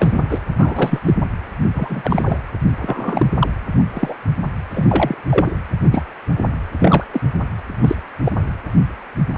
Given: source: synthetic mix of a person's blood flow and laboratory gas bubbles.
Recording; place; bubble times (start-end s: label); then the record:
Doppler ultrasound of blood flow; precordium
0.00-0.22 s: bubbles
0.29-0.39 s: bubbles
0.57-1.01 s: bubbles
1.05-1.14 s: bubbles
1.74-2.38 s: bubbles
2.82-3.26 s: bubbles
3.40-3.50 s: bubbles
3.78-3.83 s: bubbles
3.93-4.15 s: bubbles
4.75-5.15 s: bubbles
5.29-5.52 s: bubbles
5.81-6.02 s: bubbles
6.79-7.04 s: bubbles
7.11-7.21 s: bubbles
7.82-7.95 s: bubbles
8.25-8.32 s: bubbles
From the record:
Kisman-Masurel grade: 233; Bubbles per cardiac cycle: several, 3 to 8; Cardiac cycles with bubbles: 50 to 99%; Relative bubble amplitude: loud (0.450 to 0.775); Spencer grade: 3 (all of the cardiac periods contain showers or single bubble signals, but not dominating or overriding the cardiac motion signals); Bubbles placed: anywhere in the cardiac cycle